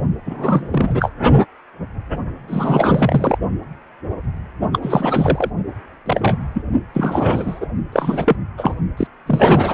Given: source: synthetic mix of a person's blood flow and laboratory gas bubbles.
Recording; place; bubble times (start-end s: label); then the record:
Doppler ultrasound of blood flow; precordium
0.26-1.11 s: bubbles
2.48-3.38 s: bubbles
4.73-4.79 s: bubbles
4.82-5.50 s: bubbles
6.06-6.39 s: bubbles
6.54-6.62 s: bubbles
6.94-7.67 s: bubbles
7.92-8.37 s: bubbles
8.57-8.74 s: bubbles
8.97-9.07 s: bubbles
9.26-9.74 s: bubbles
From the record:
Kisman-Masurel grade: 333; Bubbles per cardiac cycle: rolling drumbeat, 9 or more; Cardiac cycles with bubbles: 50 to 99%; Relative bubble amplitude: loud (0.450 to 0.775); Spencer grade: 3 (all of the cardiac periods contain showers or single bubble signals, but not dominating or overriding the cardiac motion signals); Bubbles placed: only in the low amplitude regions of the cardiac cycle